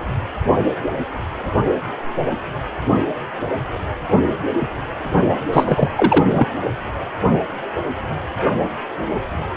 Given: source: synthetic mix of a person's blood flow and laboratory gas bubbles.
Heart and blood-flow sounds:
Doppler ultrasound of blood flow; precordium
5.52-5.88 s: bubbles
5.96-6.48 s: bubbles
From the record:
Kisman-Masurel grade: 213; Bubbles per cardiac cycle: several, 3 to 8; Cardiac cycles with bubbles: 1 to 10%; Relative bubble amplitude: loud (0.450 to 0.775); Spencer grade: 1 (occasional bubble signal discernible with the cardiac motion signal, with majority of cardiac periods free of bubbles); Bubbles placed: only in the low amplitude regions of the cardiac cycle

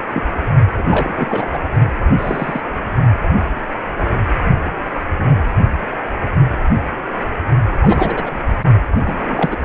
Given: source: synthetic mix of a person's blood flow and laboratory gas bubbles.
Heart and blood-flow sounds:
Doppler ultrasound of blood flow; precordium
0.13-0.23 s: bubbles
0.77-1.49 s: bubbles
1.52-1.58 s: bubbles
2.18-2.61 s: bubbles
7.82-8.32 s: bubbles
8.91-9.56 s: bubbles
From the record:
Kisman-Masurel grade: 222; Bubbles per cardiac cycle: several, 3 to 8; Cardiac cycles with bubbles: 10 to 50%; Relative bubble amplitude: moderate (0.250 to 0.450); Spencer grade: 2 (many but less than half of the cardiac periods contain bubble signals, singularly or in groups); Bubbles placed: only in the low amplitude regions of the cardiac cycle

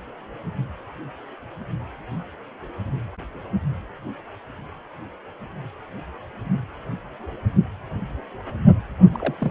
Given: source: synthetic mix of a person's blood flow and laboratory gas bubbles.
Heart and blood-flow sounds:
Doppler ultrasound of blood flow; precordium
9.12-9.35 s: bubbles
9.38-9.51 s: bubbles
From the record:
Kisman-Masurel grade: 121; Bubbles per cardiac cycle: 1 to 2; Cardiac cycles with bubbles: 10 to 50%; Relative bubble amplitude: barely perceptible (0.100 to 0.250); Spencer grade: 2 (many but less than half of the cardiac periods contain bubble signals, singularly or in groups); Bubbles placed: only in the low amplitude regions of the cardiac cycle

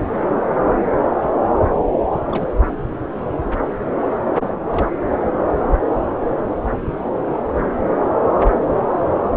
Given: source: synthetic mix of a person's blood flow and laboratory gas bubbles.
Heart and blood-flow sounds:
Doppler ultrasound of blood flow; subclavian vein
2.32-2.47 s: bubbles
4.72-4.87 s: bubbles
From the record:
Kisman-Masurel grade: 121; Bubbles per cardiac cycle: 1 to 2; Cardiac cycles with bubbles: 10 to 50%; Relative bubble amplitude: barely perceptible (0.100 to 0.250); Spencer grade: 2 (many but less than half of the cardiac periods contain bubble signals, singularly or in groups); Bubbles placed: anywhere in the cardiac cycle

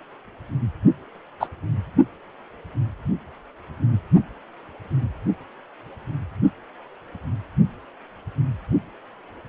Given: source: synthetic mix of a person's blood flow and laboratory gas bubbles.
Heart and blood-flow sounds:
Doppler ultrasound of blood flow; precordium
1.40-1.47 s: bubbles
From the record:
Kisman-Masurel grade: 113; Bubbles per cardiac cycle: 1 to 2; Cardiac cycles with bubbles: 1 to 10%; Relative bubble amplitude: loud (0.450 to 0.775); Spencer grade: 1 (occasional bubble signal discernible with the cardiac motion signal, with majority of cardiac periods free of bubbles); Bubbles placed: only in the low amplitude regions of the cardiac cycle

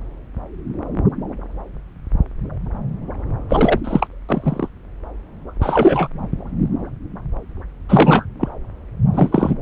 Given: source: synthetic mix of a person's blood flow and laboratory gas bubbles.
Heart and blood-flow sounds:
Doppler ultrasound of blood flow; subclavian vein
3.49-3.80 s: bubbles
3.84-4.08 s: bubbles
4.29-4.69 s: bubbles
5.61-6.08 s: bubbles
7.89-8.25 s: bubbles
8.40-8.48 s: bubbles
9.12-9.54 s: bubbles
From the record:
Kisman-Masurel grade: 223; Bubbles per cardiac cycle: several, 3 to 8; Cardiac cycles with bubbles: 10 to 50%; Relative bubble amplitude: loud (0.450 to 0.775); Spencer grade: 2 (many but less than half of the cardiac periods contain bubble signals, singularly or in groups); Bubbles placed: anywhere in the cardiac cycle

